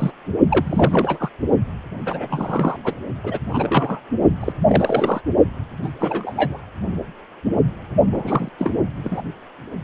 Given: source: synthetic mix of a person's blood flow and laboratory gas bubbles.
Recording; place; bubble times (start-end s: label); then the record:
Doppler ultrasound of blood flow; precordium
0.00-0.12 s: bubbles
0.50-1.29 s: bubbles
2.02-2.77 s: bubbles
2.83-2.95 s: bubbles
3.24-3.39 s: bubbles
3.49-4.00 s: bubbles
4.41-4.53 s: bubbles
4.67-5.21 s: bubbles
5.83-5.89 s: bubbles
6.00-6.59 s: bubbles
8.12-8.49 s: bubbles
8.58-8.82 s: bubbles
9.04-9.21 s: bubbles
From the record:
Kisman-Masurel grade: 232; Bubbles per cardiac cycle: several, 3 to 8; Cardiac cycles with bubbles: 50 to 99%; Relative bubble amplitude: moderate (0.250 to 0.450); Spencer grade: 3 (all of the cardiac periods contain showers or single bubble signals, but not dominating or overriding the cardiac motion signals); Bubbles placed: only in the low amplitude regions of the cardiac cycle